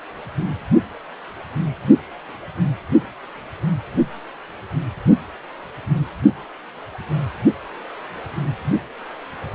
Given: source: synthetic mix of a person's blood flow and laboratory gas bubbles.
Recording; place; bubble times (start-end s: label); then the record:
Doppler ultrasound of blood flow; precordium
no bubbles
From the record:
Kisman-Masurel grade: 000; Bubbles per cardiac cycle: 0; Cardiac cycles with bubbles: 0%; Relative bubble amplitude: no bubbles discernible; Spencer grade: 0 (complete lack of bubble signals)